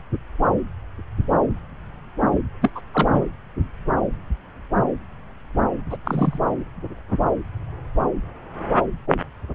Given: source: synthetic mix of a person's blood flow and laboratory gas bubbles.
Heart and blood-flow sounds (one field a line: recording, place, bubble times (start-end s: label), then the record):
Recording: Doppler ultrasound of blood flow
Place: subclavian vein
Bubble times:
2.61-2.70 s: bubbles
2.75-2.81 s: bubbles
2.94-3.26 s: bubbles
5.90-5.97 s: bubbles
6.04-6.39 s: bubbles
From the record:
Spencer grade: 2 (many but less than half of the cardiac periods contain bubble signals, singularly or in groups)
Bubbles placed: anywhere in the cardiac cycle